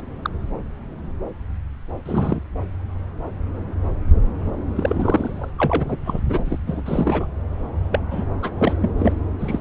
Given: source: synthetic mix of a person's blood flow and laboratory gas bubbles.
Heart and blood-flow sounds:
Doppler ultrasound of blood flow; subclavian vein
0.22-0.29 s: bubbles
2.05-2.40 s: bubbles
4.75-5.50 s: bubbles
5.58-5.97 s: bubbles
6.04-6.21 s: bubbles
6.28-6.59 s: bubbles
6.67-6.83 s: bubbles
6.85-7.26 s: bubbles
7.92-8.00 s: bubbles
8.11-8.24 s: bubbles
8.42-8.52 s: bubbles
8.58-8.74 s: bubbles
8.81-8.92 s: bubbles
8.99-9.13 s: bubbles
9.40-9.59 s: bubbles
From the record:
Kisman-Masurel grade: 232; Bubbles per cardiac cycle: several, 3 to 8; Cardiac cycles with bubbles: 50 to 99%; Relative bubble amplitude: moderate (0.250 to 0.450); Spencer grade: 3 (all of the cardiac periods contain showers or single bubble signals, but not dominating or overriding the cardiac motion signals); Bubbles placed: anywhere in the cardiac cycle

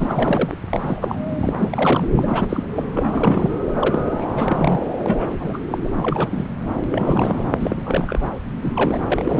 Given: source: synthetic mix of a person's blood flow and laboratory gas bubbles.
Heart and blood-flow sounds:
Doppler ultrasound of blood flow; subclavian vein
0.00-0.55 s: bubbles
0.72-1.17 s: bubbles
1.38-2.08 s: bubbles
2.16-2.64 s: bubbles
2.75-2.85 s: bubbles
2.94-3.50 s: bubbles
3.79-4.32 s: bubbles
4.35-4.79 s: bubbles
5.03-5.28 s: bubbles
5.32-5.58 s: bubbles
5.71-5.78 s: bubbles
5.84-5.90 s: bubbles
5.96-6.49 s: bubbles
6.89-7.49 s: bubbles
7.60-8.31 s: bubbles
8.62-9.40 s: bubbles
From the record:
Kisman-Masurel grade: 342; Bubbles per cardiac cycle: rolling drumbeat, 9 or more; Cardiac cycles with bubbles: 100%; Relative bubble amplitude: moderate (0.250 to 0.450); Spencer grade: 3 (all of the cardiac periods contain showers or single bubble signals, but not dominating or overriding the cardiac motion signals); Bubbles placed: anywhere in the cardiac cycle

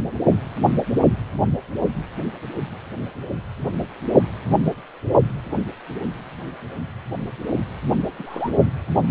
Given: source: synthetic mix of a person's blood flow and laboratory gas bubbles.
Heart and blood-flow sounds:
Doppler ultrasound of blood flow; precordium
8.18-8.50 s: bubbles
From the record:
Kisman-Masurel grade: 111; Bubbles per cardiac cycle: 1 to 2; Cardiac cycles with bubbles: 1 to 10%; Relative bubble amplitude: barely perceptible (0.100 to 0.250); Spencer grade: 1 (occasional bubble signal discernible with the cardiac motion signal, with majority of cardiac periods free of bubbles); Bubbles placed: only in the low amplitude regions of the cardiac cycle

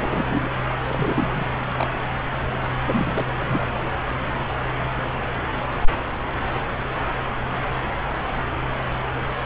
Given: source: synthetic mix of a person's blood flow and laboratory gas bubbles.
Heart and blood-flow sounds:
Doppler ultrasound of blood flow; subclavian vein
0.00-0.48 s: bubbles
0.82-1.57 s: bubbles
1.71-1.99 s: bubbles
2.84-3.25 s: bubbles
3.36-3.67 s: bubbles
From the record:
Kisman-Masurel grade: 221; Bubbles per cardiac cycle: several, 3 to 8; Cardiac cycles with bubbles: 10 to 50%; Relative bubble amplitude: barely perceptible (0.100 to 0.250); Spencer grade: 2 (many but less than half of the cardiac periods contain bubble signals, singularly or in groups); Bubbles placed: anywhere in the cardiac cycle

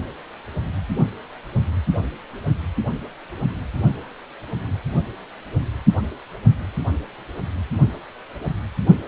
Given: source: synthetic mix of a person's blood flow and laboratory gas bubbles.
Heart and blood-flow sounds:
Doppler ultrasound of blood flow; precordium
no bubbles
From the record:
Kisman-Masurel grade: 000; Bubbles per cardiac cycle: 0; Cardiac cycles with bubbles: 0%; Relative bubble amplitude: no bubbles discernible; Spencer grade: 0 (complete lack of bubble signals)

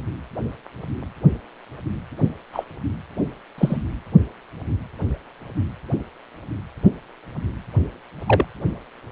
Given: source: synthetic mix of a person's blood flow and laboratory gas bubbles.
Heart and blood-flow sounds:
Doppler ultrasound of blood flow; precordium
2.53-2.64 s: bubbles
3.58-3.82 s: bubbles
8.26-8.45 s: bubbles
From the record:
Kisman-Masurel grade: 122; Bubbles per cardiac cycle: 1 to 2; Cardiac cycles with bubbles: 10 to 50%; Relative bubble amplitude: moderate (0.250 to 0.450); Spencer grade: 2 (many but less than half of the cardiac periods contain bubble signals, singularly or in groups); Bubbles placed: anywhere in the cardiac cycle

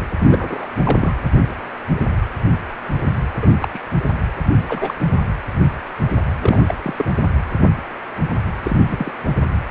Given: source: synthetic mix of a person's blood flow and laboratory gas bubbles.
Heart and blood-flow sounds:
Doppler ultrasound of blood flow; precordium
0.26-0.65 s: bubbles
0.84-1.13 s: bubbles
3.41-3.48 s: bubbles
3.61-3.68 s: bubbles
3.73-3.79 s: bubbles
4.68-4.94 s: bubbles
6.42-6.58 s: bubbles
6.67-6.75 s: bubbles
6.82-6.94 s: bubbles
6.98-7.04 s: bubbles
8.63-8.77 s: bubbles
8.89-9.12 s: bubbles
From the record:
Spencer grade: 2 (many but less than half of the cardiac periods contain bubble signals, singularly or in groups); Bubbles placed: anywhere in the cardiac cycle

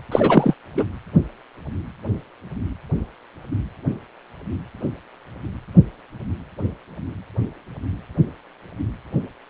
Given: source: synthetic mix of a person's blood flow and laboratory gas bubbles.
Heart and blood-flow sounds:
Doppler ultrasound of blood flow; precordium
0.11-0.54 s: bubbles
0.77-0.84 s: bubbles
From the record:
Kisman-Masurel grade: 213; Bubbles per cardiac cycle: several, 3 to 8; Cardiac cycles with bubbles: 1 to 10%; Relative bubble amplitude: loud (0.450 to 0.775); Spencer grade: 1 (occasional bubble signal discernible with the cardiac motion signal, with majority of cardiac periods free of bubbles); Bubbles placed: anywhere in the cardiac cycle

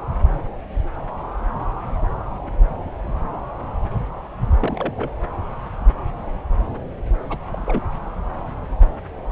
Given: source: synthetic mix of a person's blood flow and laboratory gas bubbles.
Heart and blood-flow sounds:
Doppler ultrasound of blood flow; subclavian vein
4.60-4.93 s: bubbles
4.96-5.11 s: bubbles
7.29-7.38 s: bubbles
7.51-7.84 s: bubbles
From the record:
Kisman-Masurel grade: 211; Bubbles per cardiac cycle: several, 3 to 8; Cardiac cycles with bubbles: 1 to 10%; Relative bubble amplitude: barely perceptible (0.100 to 0.250); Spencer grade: 1 (occasional bubble signal discernible with the cardiac motion signal, with majority of cardiac periods free of bubbles); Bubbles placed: anywhere in the cardiac cycle

